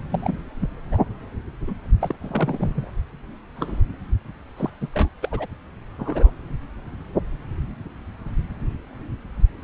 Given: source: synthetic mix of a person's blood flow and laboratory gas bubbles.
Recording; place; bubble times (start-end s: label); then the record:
Doppler ultrasound of blood flow; subclavian vein
0.11-0.38 s: bubbles
0.59-0.69 s: bubbles
0.91-0.98 s: bubbles
1.67-1.74 s: bubbles
2.00-2.15 s: bubbles
2.21-2.90 s: bubbles
3.55-3.81 s: bubbles
4.57-4.70 s: bubbles
4.81-4.88 s: bubbles
4.93-5.08 s: bubbles
5.21-5.29 s: bubbles
5.32-5.46 s: bubbles
5.99-6.32 s: bubbles
From the record:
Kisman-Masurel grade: 221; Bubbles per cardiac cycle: several, 3 to 8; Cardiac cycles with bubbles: 10 to 50%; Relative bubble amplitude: barely perceptible (0.100 to 0.250); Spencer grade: 2 (many but less than half of the cardiac periods contain bubble signals, singularly or in groups); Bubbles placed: anywhere in the cardiac cycle